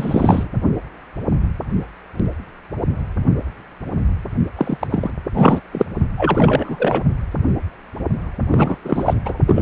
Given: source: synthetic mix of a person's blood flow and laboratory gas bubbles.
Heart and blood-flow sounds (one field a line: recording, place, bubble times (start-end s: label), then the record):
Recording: Doppler ultrasound of blood flow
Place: precordium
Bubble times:
0.00-0.47 s: bubbles
4.57-5.10 s: bubbles
5.33-5.60 s: bubbles
5.72-5.86 s: bubbles
6.17-7.02 s: bubbles
8.51-8.78 s: bubbles
8.85-9.14 s: bubbles
9.25-9.41 s: bubbles
9.47-9.62 s: bubbles
From the record:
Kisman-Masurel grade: 333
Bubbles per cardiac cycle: rolling drumbeat, 9 or more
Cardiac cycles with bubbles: 50 to 99%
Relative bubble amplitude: loud (0.450 to 0.775)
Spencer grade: 3 (all of the cardiac periods contain showers or single bubble signals, but not dominating or overriding the cardiac motion signals)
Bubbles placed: only in the low amplitude regions of the cardiac cycle